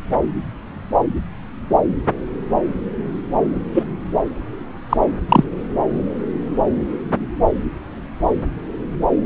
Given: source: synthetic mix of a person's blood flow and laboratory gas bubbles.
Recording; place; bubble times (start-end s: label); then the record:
Doppler ultrasound of blood flow; subclavian vein
3.74-3.83 s: bubbles
4.89-4.97 s: bubbles
5.29-5.44 s: bubbles
From the record:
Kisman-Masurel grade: 123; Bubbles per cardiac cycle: 1 to 2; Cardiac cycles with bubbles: 10 to 50%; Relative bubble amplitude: loud (0.450 to 0.775); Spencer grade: 2 (many but less than half of the cardiac periods contain bubble signals, singularly or in groups); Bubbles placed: anywhere in the cardiac cycle